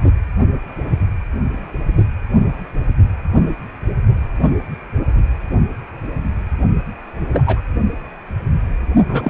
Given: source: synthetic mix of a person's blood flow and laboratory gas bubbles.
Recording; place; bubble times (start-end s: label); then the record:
Doppler ultrasound of blood flow; precordium
7.32-7.44 s: bubbles
7.46-7.61 s: bubbles
9.09-9.30 s: bubbles
From the record:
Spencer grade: 2 (many but less than half of the cardiac periods contain bubble signals, singularly or in groups); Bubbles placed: only in the low amplitude regions of the cardiac cycle